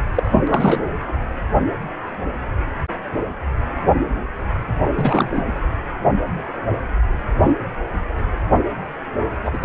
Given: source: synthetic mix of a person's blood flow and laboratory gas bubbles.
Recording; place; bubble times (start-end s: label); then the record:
Doppler ultrasound of blood flow; precordium
0.15-0.42 s: bubbles
0.47-0.82 s: bubbles
4.92-5.46 s: bubbles
9.43-9.58 s: bubbles
9.61-9.65 s: bubbles
From the record:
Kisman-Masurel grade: 232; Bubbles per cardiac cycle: several, 3 to 8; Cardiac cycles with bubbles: 50 to 99%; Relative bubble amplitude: moderate (0.250 to 0.450); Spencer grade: 3 (all of the cardiac periods contain showers or single bubble signals, but not dominating or overriding the cardiac motion signals); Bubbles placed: anywhere in the cardiac cycle